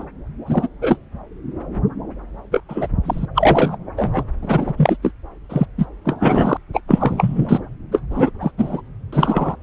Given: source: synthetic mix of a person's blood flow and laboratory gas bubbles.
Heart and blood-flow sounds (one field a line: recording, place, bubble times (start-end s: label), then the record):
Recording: Doppler ultrasound of blood flow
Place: subclavian vein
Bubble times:
0.00-0.05 s: bubbles
0.46-0.68 s: bubbles
0.81-0.98 s: bubbles
2.51-2.63 s: bubbles
2.69-2.88 s: bubbles
3.05-3.25 s: bubbles
3.35-3.76 s: bubbles
3.96-4.24 s: bubbles
4.42-4.74 s: bubbles
4.77-4.96 s: bubbles
5.02-5.12 s: bubbles
5.49-5.66 s: bubbles
5.77-5.85 s: bubbles
6.04-6.57 s: bubbles
6.73-6.80 s: bubbles
6.88-7.60 s: bubbles
7.92-8.00 s: bubbles
8.10-8.30 s: bubbles
8.40-8.51 s: bubbles
8.58-8.81 s: bubbles
9.12-9.56 s: bubbles
From the record:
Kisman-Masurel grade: 243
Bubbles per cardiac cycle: several, 3 to 8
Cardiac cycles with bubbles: 100%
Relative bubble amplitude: loud (0.450 to 0.775)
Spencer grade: 3 (all of the cardiac periods contain showers or single bubble signals, but not dominating or overriding the cardiac motion signals)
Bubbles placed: anywhere in the cardiac cycle